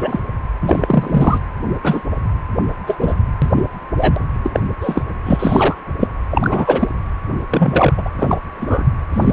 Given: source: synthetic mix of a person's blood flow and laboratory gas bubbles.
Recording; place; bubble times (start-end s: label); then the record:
Doppler ultrasound of blood flow; precordium
0.00-0.20 s: bubbles
0.62-1.41 s: bubbles
1.83-2.01 s: bubbles
2.87-2.97 s: bubbles
3.00-3.14 s: bubbles
3.42-3.63 s: bubbles
3.96-4.16 s: bubbles
4.43-4.60 s: bubbles
4.81-5.02 s: bubbles
5.25-5.75 s: bubbles
6.00-6.08 s: bubbles
6.30-6.88 s: bubbles
7.50-7.94 s: bubbles
7.97-8.03 s: bubbles
8.05-8.10 s: bubbles
8.17-8.37 s: bubbles
8.55-8.85 s: bubbles
9.12-9.33 s: bubbles
From the record:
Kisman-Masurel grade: 243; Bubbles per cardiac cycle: several, 3 to 8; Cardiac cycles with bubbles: 100%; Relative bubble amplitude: loud (0.450 to 0.775); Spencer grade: 3 (all of the cardiac periods contain showers or single bubble signals, but not dominating or overriding the cardiac motion signals); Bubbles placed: anywhere in the cardiac cycle